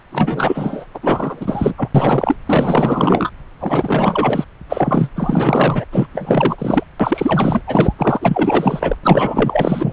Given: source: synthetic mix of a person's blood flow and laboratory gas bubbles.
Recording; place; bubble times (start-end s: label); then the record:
Doppler ultrasound of blood flow; subclavian vein
0.12-0.85 s: bubbles
0.94-1.74 s: bubbles
1.76-1.90 s: bubbles
1.95-2.36 s: bubbles
2.46-3.30 s: bubbles
3.59-4.45 s: bubbles
4.69-5.10 s: bubbles
5.16-5.85 s: bubbles
5.92-6.07 s: bubbles
6.13-6.83 s: bubbles
7.00-7.62 s: bubbles
7.67-7.92 s: bubbles
7.98-8.97 s: bubbles
9.03-9.93 s: bubbles
From the record:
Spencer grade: 4 (maximum detectable bubble signal sounding continuously throughout systole and diastole of every cardiac period, and overriding the amplitude of the normal cardiac signals); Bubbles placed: anywhere in the cardiac cycle